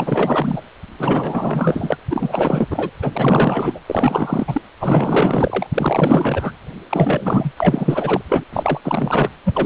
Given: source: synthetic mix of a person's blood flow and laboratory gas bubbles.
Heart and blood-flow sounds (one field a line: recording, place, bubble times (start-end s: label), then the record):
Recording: Doppler ultrasound of blood flow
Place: precordium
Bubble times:
0.00-0.62 s: bubbles
0.98-1.97 s: bubbles
2.10-2.67 s: bubbles
2.71-2.90 s: bubbles
3.02-3.80 s: bubbles
3.86-4.61 s: bubbles
4.80-5.66 s: bubbles
5.74-6.52 s: bubbles
6.90-7.51 s: bubbles
7.56-8.21 s: bubbles
8.29-8.44 s: bubbles
8.53-8.80 s: bubbles
8.83-9.29 s: bubbles
9.45-9.66 s: bubbles
From the record:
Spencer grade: 4 (maximum detectable bubble signal sounding continuously throughout systole and diastole of every cardiac period, and overriding the amplitude of the normal cardiac signals)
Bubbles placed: anywhere in the cardiac cycle